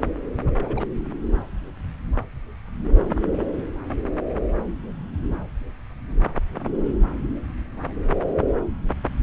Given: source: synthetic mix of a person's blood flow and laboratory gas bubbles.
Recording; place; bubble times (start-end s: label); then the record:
Doppler ultrasound of blood flow; subclavian vein
0.46-0.52 s: bubbles
0.56-0.88 s: bubbles
From the record:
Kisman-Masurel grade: 211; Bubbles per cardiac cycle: several, 3 to 8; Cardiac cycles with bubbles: 1 to 10%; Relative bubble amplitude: barely perceptible (0.100 to 0.250); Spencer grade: 1 (occasional bubble signal discernible with the cardiac motion signal, with majority of cardiac periods free of bubbles); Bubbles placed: anywhere in the cardiac cycle